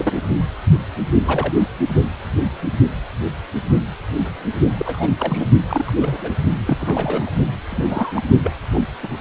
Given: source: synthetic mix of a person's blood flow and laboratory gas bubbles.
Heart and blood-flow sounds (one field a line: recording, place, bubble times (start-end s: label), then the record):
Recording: Doppler ultrasound of blood flow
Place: precordium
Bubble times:
0.00-0.22 s: bubbles
1.26-1.53 s: bubbles
4.77-5.08 s: bubbles
5.18-5.50 s: bubbles
5.60-6.30 s: bubbles
6.67-7.31 s: bubbles
7.70-8.22 s: bubbles
8.44-8.54 s: bubbles
8.74-8.80 s: bubbles
9.03-9.08 s: bubbles
From the record:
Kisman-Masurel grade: 222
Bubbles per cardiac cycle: several, 3 to 8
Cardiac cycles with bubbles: 10 to 50%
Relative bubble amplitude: moderate (0.250 to 0.450)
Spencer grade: 2 (many but less than half of the cardiac periods contain bubble signals, singularly or in groups)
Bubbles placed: only in the low amplitude regions of the cardiac cycle